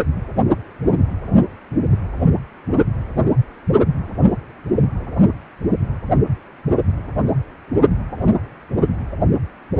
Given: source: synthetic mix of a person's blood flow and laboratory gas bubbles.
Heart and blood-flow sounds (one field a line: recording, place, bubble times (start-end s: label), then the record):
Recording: Doppler ultrasound of blood flow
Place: precordium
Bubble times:
no bubbles
From the record:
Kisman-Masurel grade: 000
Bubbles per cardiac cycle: 0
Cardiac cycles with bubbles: 0%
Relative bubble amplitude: no bubbles discernible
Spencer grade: 0 (complete lack of bubble signals)